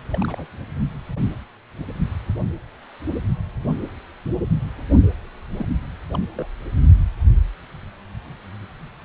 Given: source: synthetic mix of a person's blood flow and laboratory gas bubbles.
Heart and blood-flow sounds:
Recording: Doppler ultrasound of blood flow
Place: precordium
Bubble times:
0.11-0.47 s: bubbles
5.56-5.67 s: bubbles
6.14-6.19 s: bubbles
6.33-6.46 s: bubbles
From the record:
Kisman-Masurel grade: 221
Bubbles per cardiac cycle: several, 3 to 8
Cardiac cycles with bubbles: 10 to 50%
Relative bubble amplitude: barely perceptible (0.100 to 0.250)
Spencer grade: 2 (many but less than half of the cardiac periods contain bubble signals, singularly or in groups)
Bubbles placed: only in the low amplitude regions of the cardiac cycle

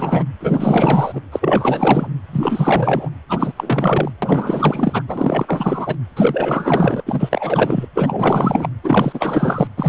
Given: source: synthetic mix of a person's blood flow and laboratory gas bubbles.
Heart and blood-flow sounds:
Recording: Doppler ultrasound of blood flow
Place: precordium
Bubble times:
0.00-0.24 s: bubbles
0.40-1.21 s: bubbles
1.31-2.07 s: bubbles
2.32-3.10 s: bubbles
3.29-3.52 s: bubbles
3.57-4.12 s: bubbles
4.22-5.02 s: bubbles
5.08-5.96 s: bubbles
6.16-7.03 s: bubbles
7.06-7.87 s: bubbles
7.95-8.69 s: bubbles
8.84-9.68 s: bubbles
9.77-9.89 s: bubbles
From the record:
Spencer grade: 4 (maximum detectable bubble signal sounding continuously throughout systole and diastole of every cardiac period, and overriding the amplitude of the normal cardiac signals)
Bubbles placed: anywhere in the cardiac cycle

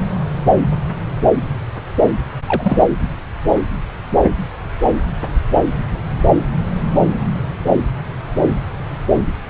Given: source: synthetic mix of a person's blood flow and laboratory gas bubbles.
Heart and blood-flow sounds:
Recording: Doppler ultrasound of blood flow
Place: subclavian vein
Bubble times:
2.46-2.95 s: bubbles
From the record:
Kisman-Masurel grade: 212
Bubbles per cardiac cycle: several, 3 to 8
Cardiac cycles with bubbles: 1 to 10%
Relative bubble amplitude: moderate (0.250 to 0.450)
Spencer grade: 1 (occasional bubble signal discernible with the cardiac motion signal, with majority of cardiac periods free of bubbles)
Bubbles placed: anywhere in the cardiac cycle

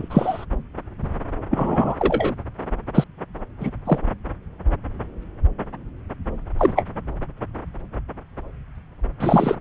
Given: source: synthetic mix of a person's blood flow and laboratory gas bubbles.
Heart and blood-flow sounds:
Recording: Doppler ultrasound of blood flow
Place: subclavian vein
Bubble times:
0.00-0.46 s: bubbles
1.51-1.96 s: bubbles
1.99-2.34 s: bubbles
2.94-3.04 s: bubbles
3.60-3.70 s: bubbles
3.85-3.98 s: bubbles
6.58-6.85 s: bubbles
9.20-9.56 s: bubbles
From the record:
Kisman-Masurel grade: 123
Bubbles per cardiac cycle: 1 to 2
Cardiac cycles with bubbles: 10 to 50%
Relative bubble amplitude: loud (0.450 to 0.775)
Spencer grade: 2 (many but less than half of the cardiac periods contain bubble signals, singularly or in groups)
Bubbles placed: anywhere in the cardiac cycle

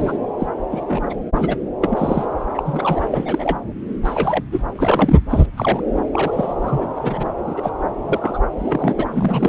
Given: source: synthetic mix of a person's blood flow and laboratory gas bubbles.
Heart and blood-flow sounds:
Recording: Doppler ultrasound of blood flow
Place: subclavian vein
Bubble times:
0.00-0.18 s: bubbles
0.39-0.47 s: bubbles
0.71-0.84 s: bubbles
0.87-1.00 s: bubbles
1.09-1.14 s: bubbles
1.35-1.56 s: bubbles
1.81-2.25 s: bubbles
2.54-2.62 s: bubbles
2.65-3.01 s: bubbles
3.11-3.58 s: bubbles
4.04-4.43 s: bubbles
4.52-4.62 s: bubbles
4.75-5.16 s: bubbles
5.29-5.46 s: bubbles
5.57-5.81 s: bubbles
5.95-6.03 s: bubbles
6.13-6.54 s: bubbles
6.62-6.88 s: bubbles
6.96-7.29 s: bubbles
7.47-7.71 s: bubbles
8.07-8.39 s: bubbles
8.58-9.06 s: bubbles
9.12-9.49 s: bubbles
From the record:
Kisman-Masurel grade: 242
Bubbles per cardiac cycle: several, 3 to 8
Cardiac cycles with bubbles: 100%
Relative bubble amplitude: moderate (0.250 to 0.450)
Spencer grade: 3 (all of the cardiac periods contain showers or single bubble signals, but not dominating or overriding the cardiac motion signals)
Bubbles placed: anywhere in the cardiac cycle

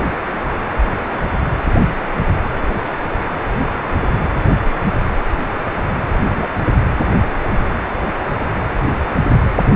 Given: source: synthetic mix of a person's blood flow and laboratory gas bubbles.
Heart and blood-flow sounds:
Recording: Doppler ultrasound of blood flow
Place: precordium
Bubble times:
6.36-6.46 s: bubbles
From the record:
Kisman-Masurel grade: 113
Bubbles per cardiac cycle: 1 to 2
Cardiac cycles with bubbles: 1 to 10%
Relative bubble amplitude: loud (0.450 to 0.775)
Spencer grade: 1 (occasional bubble signal discernible with the cardiac motion signal, with majority of cardiac periods free of bubbles)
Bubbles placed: anywhere in the cardiac cycle

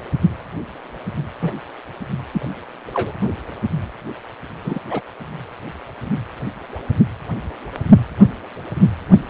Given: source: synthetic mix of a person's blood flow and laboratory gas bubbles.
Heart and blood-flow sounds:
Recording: Doppler ultrasound of blood flow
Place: precordium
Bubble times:
1.42-1.57 s: bubbles
2.31-2.48 s: bubbles
2.94-3.14 s: bubbles
4.63-4.79 s: bubbles
4.89-5.01 s: bubbles
From the record:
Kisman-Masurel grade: 122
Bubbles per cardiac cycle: 1 to 2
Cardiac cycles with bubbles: 10 to 50%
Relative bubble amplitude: moderate (0.250 to 0.450)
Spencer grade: 2 (many but less than half of the cardiac periods contain bubble signals, singularly or in groups)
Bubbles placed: only in the low amplitude regions of the cardiac cycle

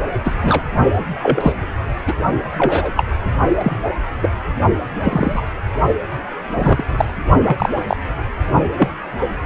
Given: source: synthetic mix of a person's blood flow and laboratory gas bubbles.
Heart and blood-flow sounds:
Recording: Doppler ultrasound of blood flow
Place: precordium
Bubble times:
0.24-0.36 s: bubbles
0.43-0.62 s: bubbles
1.23-1.52 s: bubbles
2.07-2.14 s: bubbles
2.58-2.92 s: bubbles
2.96-3.05 s: bubbles
3.59-3.72 s: bubbles
4.21-4.31 s: bubbles
5.04-5.42 s: bubbles
6.54-6.83 s: bubbles
6.97-7.05 s: bubbles
7.45-7.84 s: bubbles
7.88-7.96 s: bubbles
8.78-8.90 s: bubbles
From the record:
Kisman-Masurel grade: 243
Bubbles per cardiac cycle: several, 3 to 8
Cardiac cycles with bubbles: 100%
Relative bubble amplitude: loud (0.450 to 0.775)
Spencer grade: 3 (all of the cardiac periods contain showers or single bubble signals, but not dominating or overriding the cardiac motion signals)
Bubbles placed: only in the low amplitude regions of the cardiac cycle

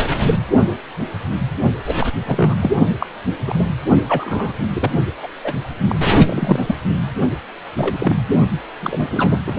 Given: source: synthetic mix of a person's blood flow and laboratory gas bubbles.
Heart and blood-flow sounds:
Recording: Doppler ultrasound of blood flow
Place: precordium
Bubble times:
0.00-0.08 s: bubbles
0.26-0.36 s: bubbles
1.87-1.95 s: bubbles
1.99-2.06 s: bubbles
2.25-2.55 s: bubbles
2.61-2.71 s: bubbles
3.00-3.06 s: bubbles
3.46-3.67 s: bubbles
4.08-4.52 s: bubbles
4.73-4.91 s: bubbles
5.22-5.27 s: bubbles
5.44-5.54 s: bubbles
5.88-5.96 s: bubbles
6.26-6.75 s: bubbles
7.77-8.21 s: bubbles
8.81-9.08 s: bubbles
9.12-9.38 s: bubbles
9.46-9.57 s: bubbles
From the record:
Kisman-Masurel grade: 232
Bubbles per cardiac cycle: several, 3 to 8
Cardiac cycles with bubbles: 50 to 99%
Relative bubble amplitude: moderate (0.250 to 0.450)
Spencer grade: 3 (all of the cardiac periods contain showers or single bubble signals, but not dominating or overriding the cardiac motion signals)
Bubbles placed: only in the low amplitude regions of the cardiac cycle

